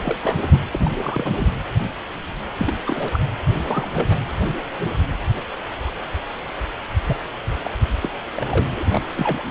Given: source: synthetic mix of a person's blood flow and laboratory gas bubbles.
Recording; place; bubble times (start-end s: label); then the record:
Doppler ultrasound of blood flow; precordium
0.04-0.18 s: bubbles
0.22-0.38 s: bubbles
0.51-0.58 s: bubbles
0.73-0.91 s: bubbles
1.02-1.35 s: bubbles
1.38-1.48 s: bubbles
2.58-2.74 s: bubbles
2.87-3.19 s: bubbles
3.48-4.16 s: bubbles
7.07-7.23 s: bubbles
7.64-7.71 s: bubbles
8.01-8.10 s: bubbles
8.31-8.67 s: bubbles
8.76-8.84 s: bubbles
8.91-9.02 s: bubbles
9.16-9.43 s: bubbles
From the record:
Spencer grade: 3 (all of the cardiac periods contain showers or single bubble signals, but not dominating or overriding the cardiac motion signals); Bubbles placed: anywhere in the cardiac cycle